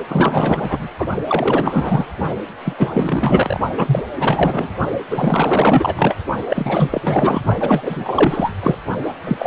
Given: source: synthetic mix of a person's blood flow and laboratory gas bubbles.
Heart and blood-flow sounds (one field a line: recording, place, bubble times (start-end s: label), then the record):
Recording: Doppler ultrasound of blood flow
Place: precordium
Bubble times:
0.08-0.89 s: bubbles
0.99-1.07 s: bubbles
1.29-2.05 s: bubbles
2.65-3.60 s: bubbles
3.75-4.03 s: bubbles
4.20-4.68 s: bubbles
5.11-6.15 s: bubbles
6.49-6.89 s: bubbles
6.92-7.42 s: bubbles
7.56-8.51 s: bubbles
8.60-8.76 s: bubbles
9.26-9.47 s: bubbles
From the record:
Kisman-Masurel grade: 444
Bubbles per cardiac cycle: continuous sound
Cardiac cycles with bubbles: 100%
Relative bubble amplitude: maximal (0.775 to 0.999)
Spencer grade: 4 (maximum detectable bubble signal sounding continuously throughout systole and diastole of every cardiac period, and overriding the amplitude of the normal cardiac signals)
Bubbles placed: only in the low amplitude regions of the cardiac cycle